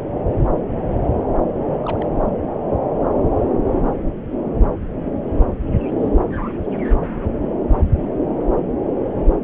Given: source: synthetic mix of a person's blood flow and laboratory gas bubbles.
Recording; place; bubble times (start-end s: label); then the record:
Doppler ultrasound of blood flow; subclavian vein
1.53-1.62 s: bubbles
1.65-2.08 s: bubbles
From the record:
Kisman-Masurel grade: 211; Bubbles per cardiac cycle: several, 3 to 8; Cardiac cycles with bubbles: 1 to 10%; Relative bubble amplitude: barely perceptible (0.100 to 0.250); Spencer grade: 1 (occasional bubble signal discernible with the cardiac motion signal, with majority of cardiac periods free of bubbles); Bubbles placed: anywhere in the cardiac cycle